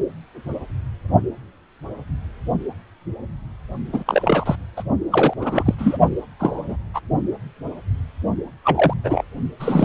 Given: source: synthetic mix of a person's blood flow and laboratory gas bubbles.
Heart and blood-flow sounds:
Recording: Doppler ultrasound of blood flow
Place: precordium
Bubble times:
3.92-4.04 s: bubbles
4.07-4.56 s: bubbles
4.77-4.83 s: bubbles
5.12-5.33 s: bubbles
5.38-5.75 s: bubbles
5.78-5.98 s: bubbles
6.39-6.76 s: bubbles
6.94-7.00 s: bubbles
8.64-8.94 s: bubbles
9.04-9.24 s: bubbles
9.60-9.85 s: bubbles
From the record:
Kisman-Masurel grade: 233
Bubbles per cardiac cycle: several, 3 to 8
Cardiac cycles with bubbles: 50 to 99%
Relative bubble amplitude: loud (0.450 to 0.775)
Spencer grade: 3 (all of the cardiac periods contain showers or single bubble signals, but not dominating or overriding the cardiac motion signals)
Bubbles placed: only in the low amplitude regions of the cardiac cycle

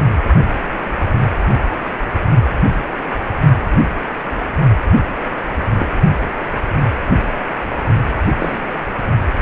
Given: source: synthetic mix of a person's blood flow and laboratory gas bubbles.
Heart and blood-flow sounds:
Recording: Doppler ultrasound of blood flow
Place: precordium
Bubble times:
5.78-5.87 s: bubbles
8.38-8.61 s: bubbles
From the record:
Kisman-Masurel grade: 122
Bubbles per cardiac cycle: 1 to 2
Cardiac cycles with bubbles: 10 to 50%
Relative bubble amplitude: moderate (0.250 to 0.450)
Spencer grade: 2 (many but less than half of the cardiac periods contain bubble signals, singularly or in groups)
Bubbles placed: only in the low amplitude regions of the cardiac cycle

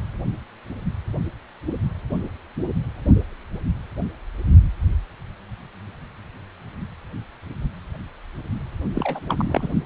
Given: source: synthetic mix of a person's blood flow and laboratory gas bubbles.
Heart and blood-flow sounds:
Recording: Doppler ultrasound of blood flow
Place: precordium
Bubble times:
8.94-9.20 s: bubbles
9.28-9.69 s: bubbles
From the record:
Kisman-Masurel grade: 212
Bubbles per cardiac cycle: several, 3 to 8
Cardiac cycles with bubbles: 1 to 10%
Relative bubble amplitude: moderate (0.250 to 0.450)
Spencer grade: 1 (occasional bubble signal discernible with the cardiac motion signal, with majority of cardiac periods free of bubbles)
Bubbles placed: only in the low amplitude regions of the cardiac cycle

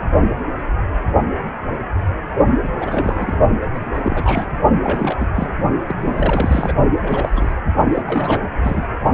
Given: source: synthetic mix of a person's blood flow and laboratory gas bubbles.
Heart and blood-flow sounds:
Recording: Doppler ultrasound of blood flow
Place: precordium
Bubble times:
0.00-0.02 s: bubbles
2.62-2.69 s: bubbles
2.80-3.38 s: bubbles
3.74-4.51 s: bubbles
4.83-5.17 s: bubbles
5.20-5.27 s: bubbles
5.33-5.53 s: bubbles
5.87-5.96 s: bubbles
6.00-6.74 s: bubbles
7.03-7.53 s: bubbles
7.89-8.02 s: bubbles
8.06-8.41 s: bubbles
8.62-8.87 s: bubbles
From the record:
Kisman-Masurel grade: 332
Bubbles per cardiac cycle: rolling drumbeat, 9 or more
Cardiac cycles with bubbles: 50 to 99%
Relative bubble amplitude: moderate (0.250 to 0.450)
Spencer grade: 3 (all of the cardiac periods contain showers or single bubble signals, but not dominating or overriding the cardiac motion signals)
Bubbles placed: only in the low amplitude regions of the cardiac cycle

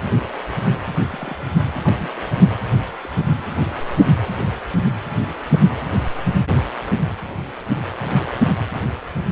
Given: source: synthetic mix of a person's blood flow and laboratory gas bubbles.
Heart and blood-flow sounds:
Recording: Doppler ultrasound of blood flow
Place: precordium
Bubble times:
1.11-1.53 s: bubbles
1.84-2.09 s: bubbles
3.01-3.09 s: bubbles
5.53-5.58 s: bubbles
From the record:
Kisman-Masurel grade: 121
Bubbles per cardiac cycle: 1 to 2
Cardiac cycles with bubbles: 10 to 50%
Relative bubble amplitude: barely perceptible (0.100 to 0.250)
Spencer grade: 2 (many but less than half of the cardiac periods contain bubble signals, singularly or in groups)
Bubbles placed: anywhere in the cardiac cycle

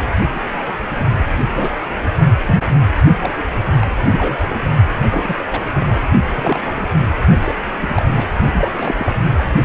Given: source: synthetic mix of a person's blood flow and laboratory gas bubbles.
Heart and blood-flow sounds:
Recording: Doppler ultrasound of blood flow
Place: precordium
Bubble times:
0.33-0.41 s: bubbles
0.46-0.62 s: bubbles
0.66-0.73 s: bubbles
0.94-1.24 s: bubbles
1.54-1.70 s: bubbles
2.46-2.60 s: bubbles
3.21-3.31 s: bubbles
3.39-3.43 s: bubbles
3.81-3.88 s: bubbles
4.10-4.58 s: bubbles
5.10-5.63 s: bubbles
5.72-5.92 s: bubbles
6.35-6.88 s: bubbles
7.44-7.55 s: bubbles
7.81-8.03 s: bubbles
8.16-8.25 s: bubbles
8.51-9.14 s: bubbles
From the record:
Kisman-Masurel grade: 242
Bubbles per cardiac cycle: several, 3 to 8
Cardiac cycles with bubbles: 100%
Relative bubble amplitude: moderate (0.250 to 0.450)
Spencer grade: 3 (all of the cardiac periods contain showers or single bubble signals, but not dominating or overriding the cardiac motion signals)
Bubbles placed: only in the low amplitude regions of the cardiac cycle

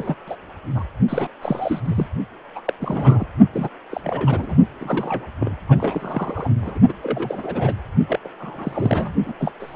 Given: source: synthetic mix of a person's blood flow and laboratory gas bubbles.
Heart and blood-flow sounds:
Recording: Doppler ultrasound of blood flow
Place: precordium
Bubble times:
0.00-0.15 s: bubbles
0.26-0.35 s: bubbles
0.75-0.84 s: bubbles
1.08-1.28 s: bubbles
1.41-1.80 s: bubbles
1.84-2.07 s: bubbles
2.55-2.60 s: bubbles
2.65-2.73 s: bubbles
2.80-3.25 s: bubbles
3.52-3.69 s: bubbles
3.90-4.01 s: bubbles
4.04-4.56 s: bubbles
4.81-5.27 s: bubbles
5.40-5.54 s: bubbles
5.69-6.51 s: bubbles
6.62-6.79 s: bubbles
6.89-6.93 s: bubbles
7.02-7.73 s: bubbles
8.07-8.20 s: bubbles
8.24-8.28 s: bubbles
8.40-9.12 s: bubbles
9.25-9.33 s: bubbles
9.38-9.51 s: bubbles
9.60-9.76 s: bubbles
From the record:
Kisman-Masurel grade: 332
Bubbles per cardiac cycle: rolling drumbeat, 9 or more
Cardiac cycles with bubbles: 50 to 99%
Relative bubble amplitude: moderate (0.250 to 0.450)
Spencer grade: 3 (all of the cardiac periods contain showers or single bubble signals, but not dominating or overriding the cardiac motion signals)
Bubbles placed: only in the low amplitude regions of the cardiac cycle

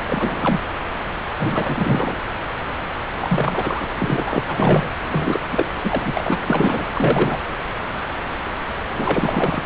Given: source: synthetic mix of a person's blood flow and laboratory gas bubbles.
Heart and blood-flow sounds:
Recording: Doppler ultrasound of blood flow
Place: subclavian vein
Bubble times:
0.08-0.60 s: bubbles
1.38-2.15 s: bubbles
3.21-3.86 s: bubbles
3.99-4.44 s: bubbles
4.47-4.91 s: bubbles
5.10-5.46 s: bubbles
5.51-5.67 s: bubbles
5.83-6.38 s: bubbles
6.47-6.86 s: bubbles
6.95-7.38 s: bubbles
8.97-9.62 s: bubbles
From the record:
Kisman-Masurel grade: 332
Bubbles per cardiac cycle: rolling drumbeat, 9 or more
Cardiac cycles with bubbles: 50 to 99%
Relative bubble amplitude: moderate (0.250 to 0.450)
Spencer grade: 3 (all of the cardiac periods contain showers or single bubble signals, but not dominating or overriding the cardiac motion signals)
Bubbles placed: anywhere in the cardiac cycle

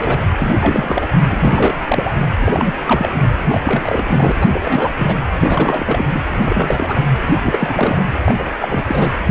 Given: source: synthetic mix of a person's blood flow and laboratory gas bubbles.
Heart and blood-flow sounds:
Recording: Doppler ultrasound of blood flow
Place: precordium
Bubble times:
0.00-0.20 s: bubbles
0.37-1.08 s: bubbles
1.31-1.80 s: bubbles
1.88-2.11 s: bubbles
2.40-2.72 s: bubbles
2.85-3.12 s: bubbles
3.49-4.03 s: bubbles
4.07-4.32 s: bubbles
4.41-4.47 s: bubbles
4.53-4.89 s: bubbles
4.99-5.18 s: bubbles
5.40-6.21 s: bubbles
6.42-7.00 s: bubbles
7.43-8.03 s: bubbles
8.26-8.44 s: bubbles
8.60-8.83 s: bubbles
8.87-9.12 s: bubbles
From the record:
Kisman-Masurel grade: 343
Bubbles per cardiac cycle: rolling drumbeat, 9 or more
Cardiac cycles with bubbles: 100%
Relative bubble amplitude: loud (0.450 to 0.775)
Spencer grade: 3 (all of the cardiac periods contain showers or single bubble signals, but not dominating or overriding the cardiac motion signals)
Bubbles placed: anywhere in the cardiac cycle

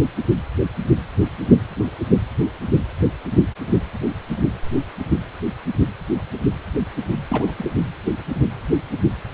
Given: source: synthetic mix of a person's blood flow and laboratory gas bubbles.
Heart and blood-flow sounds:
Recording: Doppler ultrasound of blood flow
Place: precordium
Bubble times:
7.29-7.54 s: bubbles
7.58-7.72 s: bubbles
From the record:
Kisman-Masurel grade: 212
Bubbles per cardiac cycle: several, 3 to 8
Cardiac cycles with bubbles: 1 to 10%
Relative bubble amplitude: moderate (0.250 to 0.450)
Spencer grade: 1 (occasional bubble signal discernible with the cardiac motion signal, with majority of cardiac periods free of bubbles)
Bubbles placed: anywhere in the cardiac cycle

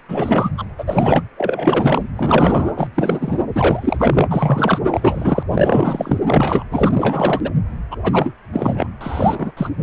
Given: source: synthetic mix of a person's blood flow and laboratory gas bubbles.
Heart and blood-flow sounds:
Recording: Doppler ultrasound of blood flow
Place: precordium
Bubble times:
0.08-0.51 s: bubbles
0.57-0.65 s: bubbles
0.78-1.23 s: bubbles
1.37-2.08 s: bubbles
2.17-2.73 s: bubbles
2.76-2.88 s: bubbles
2.95-3.39 s: bubbles
3.53-4.79 s: bubbles
4.90-5.43 s: bubbles
5.54-6.19 s: bubbles
6.27-6.65 s: bubbles
6.71-6.91 s: bubbles
6.94-7.51 s: bubbles
7.91-7.96 s: bubbles
8.04-8.33 s: bubbles
8.53-8.88 s: bubbles
9.01-9.52 s: bubbles
9.56-9.70 s: bubbles
9.77-9.83 s: bubbles
From the record:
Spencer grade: 3 (all of the cardiac periods contain showers or single bubble signals, but not dominating or overriding the cardiac motion signals)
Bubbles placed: anywhere in the cardiac cycle

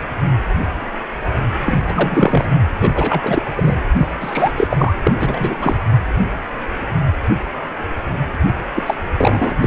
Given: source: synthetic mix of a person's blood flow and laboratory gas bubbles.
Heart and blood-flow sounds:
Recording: Doppler ultrasound of blood flow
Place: precordium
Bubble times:
1.64-1.80 s: bubbles
1.85-2.48 s: bubbles
2.80-3.42 s: bubbles
3.56-3.78 s: bubbles
3.97-4.07 s: bubbles
4.20-4.52 s: bubbles
4.56-4.67 s: bubbles
4.70-4.93 s: bubbles
5.04-5.12 s: bubbles
5.15-5.57 s: bubbles
5.61-5.75 s: bubbles
8.75-8.83 s: bubbles
8.86-8.95 s: bubbles
9.17-9.54 s: bubbles
9.61-9.66 s: bubbles
From the record:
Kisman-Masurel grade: 333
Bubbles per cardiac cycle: rolling drumbeat, 9 or more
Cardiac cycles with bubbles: 50 to 99%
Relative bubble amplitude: loud (0.450 to 0.775)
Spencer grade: 3 (all of the cardiac periods contain showers or single bubble signals, but not dominating or overriding the cardiac motion signals)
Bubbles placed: only in the low amplitude regions of the cardiac cycle

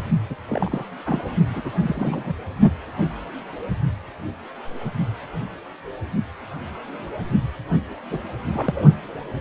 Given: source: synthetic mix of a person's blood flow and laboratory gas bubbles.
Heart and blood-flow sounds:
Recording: Doppler ultrasound of blood flow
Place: precordium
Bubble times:
0.30-0.35 s: bubbles
0.48-0.89 s: bubbles
1.06-1.21 s: bubbles
1.49-1.71 s: bubbles
1.78-2.34 s: bubbles
8.11-8.18 s: bubbles
8.53-8.85 s: bubbles
From the record:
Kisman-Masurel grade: 222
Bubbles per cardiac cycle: several, 3 to 8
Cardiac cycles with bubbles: 10 to 50%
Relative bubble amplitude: moderate (0.250 to 0.450)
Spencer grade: 2 (many but less than half of the cardiac periods contain bubble signals, singularly or in groups)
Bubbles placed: only in the low amplitude regions of the cardiac cycle

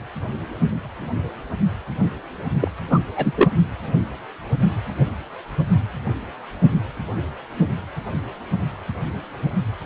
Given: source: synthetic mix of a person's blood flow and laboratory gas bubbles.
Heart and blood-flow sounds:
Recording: Doppler ultrasound of blood flow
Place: precordium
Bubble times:
2.60-2.68 s: bubbles
2.90-2.98 s: bubbles
3.16-3.33 s: bubbles
3.36-3.50 s: bubbles
From the record:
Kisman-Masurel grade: 223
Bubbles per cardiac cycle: several, 3 to 8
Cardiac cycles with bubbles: 10 to 50%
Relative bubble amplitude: loud (0.450 to 0.775)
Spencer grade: 2 (many but less than half of the cardiac periods contain bubble signals, singularly or in groups)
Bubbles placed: anywhere in the cardiac cycle

